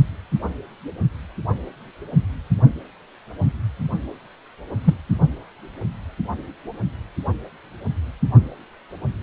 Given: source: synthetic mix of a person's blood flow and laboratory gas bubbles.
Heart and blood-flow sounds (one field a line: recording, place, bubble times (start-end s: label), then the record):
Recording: Doppler ultrasound of blood flow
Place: precordium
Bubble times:
4.84-4.94 s: bubbles
From the record:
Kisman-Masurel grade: 113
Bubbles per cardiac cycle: 1 to 2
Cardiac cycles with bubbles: 1 to 10%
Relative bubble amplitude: loud (0.450 to 0.775)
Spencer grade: 1 (occasional bubble signal discernible with the cardiac motion signal, with majority of cardiac periods free of bubbles)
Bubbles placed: only in the low amplitude regions of the cardiac cycle